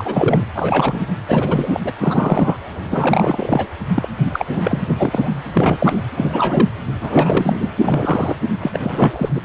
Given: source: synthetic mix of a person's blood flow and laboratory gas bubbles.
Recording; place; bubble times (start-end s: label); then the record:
Doppler ultrasound of blood flow; precordium
0.00-0.46 s: bubbles
0.55-1.02 s: bubbles
1.28-1.80 s: bubbles
1.84-1.92 s: bubbles
1.98-2.56 s: bubbles
2.90-3.68 s: bubbles
3.95-4.08 s: bubbles
4.25-4.62 s: bubbles
4.64-4.96 s: bubbles
4.99-5.33 s: bubbles
5.54-5.77 s: bubbles
5.79-6.00 s: bubbles
6.17-6.69 s: bubbles
7.01-7.69 s: bubbles
7.82-8.36 s: bubbles
8.62-8.79 s: bubbles
8.81-9.42 s: bubbles
From the record:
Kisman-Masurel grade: 343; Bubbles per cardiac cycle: rolling drumbeat, 9 or more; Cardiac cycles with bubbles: 100%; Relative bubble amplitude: loud (0.450 to 0.775); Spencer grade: 3 (all of the cardiac periods contain showers or single bubble signals, but not dominating or overriding the cardiac motion signals); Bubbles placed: anywhere in the cardiac cycle